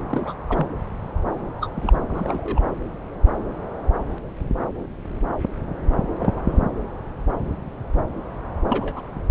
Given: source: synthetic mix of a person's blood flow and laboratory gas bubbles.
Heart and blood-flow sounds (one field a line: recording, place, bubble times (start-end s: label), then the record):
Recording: Doppler ultrasound of blood flow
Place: subclavian vein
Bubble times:
0.00-0.02 s: bubbles
0.08-0.34 s: bubbles
0.48-0.67 s: bubbles
1.61-1.68 s: bubbles
1.75-1.99 s: bubbles
2.08-2.60 s: bubbles
6.19-6.64 s: bubbles
8.70-9.01 s: bubbles
From the record:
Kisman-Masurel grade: 221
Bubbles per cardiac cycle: several, 3 to 8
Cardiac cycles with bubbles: 10 to 50%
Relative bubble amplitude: barely perceptible (0.100 to 0.250)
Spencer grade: 2 (many but less than half of the cardiac periods contain bubble signals, singularly or in groups)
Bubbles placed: anywhere in the cardiac cycle